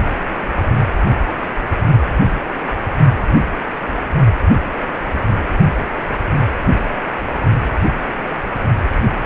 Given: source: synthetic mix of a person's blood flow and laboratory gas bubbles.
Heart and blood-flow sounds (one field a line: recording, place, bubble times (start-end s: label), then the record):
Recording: Doppler ultrasound of blood flow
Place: precordium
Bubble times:
no bubbles
From the record:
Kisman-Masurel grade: 000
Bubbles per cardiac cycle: 0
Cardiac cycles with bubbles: 0%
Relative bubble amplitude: no bubbles discernible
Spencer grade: 0 (complete lack of bubble signals)